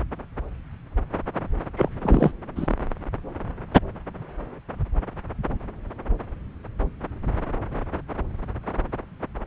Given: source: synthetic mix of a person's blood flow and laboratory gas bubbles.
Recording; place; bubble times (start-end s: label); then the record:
Doppler ultrasound of blood flow; subclavian vein
1.76-1.89 s: bubbles
2.01-2.33 s: bubbles
2.55-2.73 s: bubbles
From the record:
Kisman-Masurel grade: 212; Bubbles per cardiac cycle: several, 3 to 8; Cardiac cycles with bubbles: 1 to 10%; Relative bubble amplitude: moderate (0.250 to 0.450); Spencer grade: 1 (occasional bubble signal discernible with the cardiac motion signal, with majority of cardiac periods free of bubbles); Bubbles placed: anywhere in the cardiac cycle